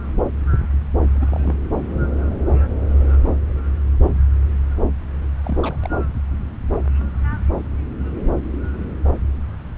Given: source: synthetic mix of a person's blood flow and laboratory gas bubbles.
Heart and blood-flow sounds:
Doppler ultrasound of blood flow; subclavian vein
1.13-1.54 s: bubbles
5.43-5.60 s: bubbles
5.62-5.77 s: bubbles
5.83-5.88 s: bubbles
From the record:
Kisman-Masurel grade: 211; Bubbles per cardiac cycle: several, 3 to 8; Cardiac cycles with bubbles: 1 to 10%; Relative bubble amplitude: barely perceptible (0.100 to 0.250); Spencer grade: 1 (occasional bubble signal discernible with the cardiac motion signal, with majority of cardiac periods free of bubbles); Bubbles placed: anywhere in the cardiac cycle

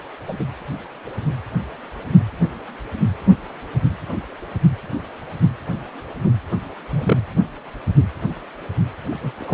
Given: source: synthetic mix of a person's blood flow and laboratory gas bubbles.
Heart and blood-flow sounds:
Doppler ultrasound of blood flow; precordium
0.27-0.34 s: bubbles
0.39-0.45 s: bubbles
6.90-7.21 s: bubbles
9.10-9.32 s: bubbles
9.39-9.54 s: bubbles
From the record:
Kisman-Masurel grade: 122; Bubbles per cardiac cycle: 1 to 2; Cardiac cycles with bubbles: 10 to 50%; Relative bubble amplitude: moderate (0.250 to 0.450); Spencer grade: 2 (many but less than half of the cardiac periods contain bubble signals, singularly or in groups); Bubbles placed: anywhere in the cardiac cycle

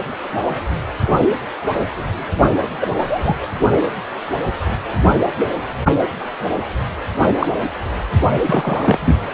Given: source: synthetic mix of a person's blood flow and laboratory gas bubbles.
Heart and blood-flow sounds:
Doppler ultrasound of blood flow; precordium
1.15-1.27 s: bubbles
2.80-2.87 s: bubbles
3.00-3.37 s: bubbles
7.39-7.48 s: bubbles
8.46-9.15 s: bubbles
From the record:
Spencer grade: 2 (many but less than half of the cardiac periods contain bubble signals, singularly or in groups); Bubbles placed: anywhere in the cardiac cycle

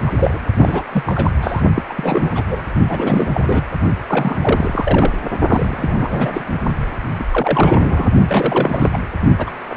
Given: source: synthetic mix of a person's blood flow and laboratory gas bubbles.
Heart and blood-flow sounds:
Doppler ultrasound of blood flow; precordium
0.06-0.11 s: bubbles
0.15-0.41 s: bubbles
0.56-0.82 s: bubbles
0.92-1.03 s: bubbles
1.06-1.31 s: bubbles
1.42-1.62 s: bubbles
1.75-1.82 s: bubbles
1.89-2.44 s: bubbles
2.47-2.66 s: bubbles
2.88-3.28 s: bubbles
3.33-3.65 s: bubbles
4.08-5.13 s: bubbles
5.47-6.45 s: bubbles
6.48-6.54 s: bubbles
7.19-7.24 s: bubbles
7.30-8.10 s: bubbles
8.26-8.89 s: bubbles
8.92-8.99 s: bubbles
9.38-9.50 s: bubbles
9.69-9.74 s: bubbles
From the record:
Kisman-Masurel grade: 342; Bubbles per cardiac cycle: rolling drumbeat, 9 or more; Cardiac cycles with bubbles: 100%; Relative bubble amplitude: moderate (0.250 to 0.450); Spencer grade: 3 (all of the cardiac periods contain showers or single bubble signals, but not dominating or overriding the cardiac motion signals); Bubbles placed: only in the low amplitude regions of the cardiac cycle

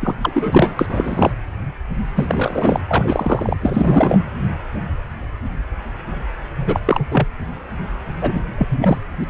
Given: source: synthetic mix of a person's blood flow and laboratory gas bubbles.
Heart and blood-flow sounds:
Doppler ultrasound of blood flow; precordium
0.01-0.14 s: bubbles
0.22-0.74 s: bubbles
0.79-1.33 s: bubbles
2.15-2.82 s: bubbles
2.87-3.56 s: bubbles
3.60-4.25 s: bubbles
6.56-6.80 s: bubbles
6.85-7.05 s: bubbles
7.11-7.27 s: bubbles
8.21-8.43 s: bubbles
8.58-8.97 s: bubbles
9.19-9.24 s: bubbles
From the record:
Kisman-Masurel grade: 333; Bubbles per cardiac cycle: rolling drumbeat, 9 or more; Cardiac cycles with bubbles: 50 to 99%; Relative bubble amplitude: loud (0.450 to 0.775); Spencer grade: 3 (all of the cardiac periods contain showers or single bubble signals, but not dominating or overriding the cardiac motion signals); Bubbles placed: anywhere in the cardiac cycle

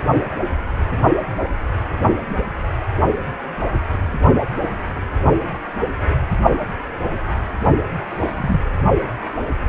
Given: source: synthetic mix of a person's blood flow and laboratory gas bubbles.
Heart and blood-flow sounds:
Doppler ultrasound of blood flow; precordium
8.11-8.32 s: bubbles
8.37-8.61 s: bubbles
From the record:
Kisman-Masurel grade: 212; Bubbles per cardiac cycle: several, 3 to 8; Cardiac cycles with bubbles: 1 to 10%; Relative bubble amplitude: moderate (0.250 to 0.450); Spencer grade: 1 (occasional bubble signal discernible with the cardiac motion signal, with majority of cardiac periods free of bubbles); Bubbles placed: only in the low amplitude regions of the cardiac cycle

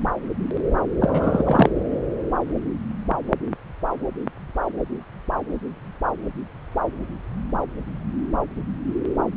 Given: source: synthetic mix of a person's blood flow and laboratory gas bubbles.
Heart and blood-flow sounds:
Doppler ultrasound of blood flow; subclavian vein
1.00-1.70 s: bubbles
From the record:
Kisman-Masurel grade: 212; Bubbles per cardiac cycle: several, 3 to 8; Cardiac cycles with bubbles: 1 to 10%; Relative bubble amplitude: moderate (0.250 to 0.450); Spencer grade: 1 (occasional bubble signal discernible with the cardiac motion signal, with majority of cardiac periods free of bubbles); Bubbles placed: anywhere in the cardiac cycle

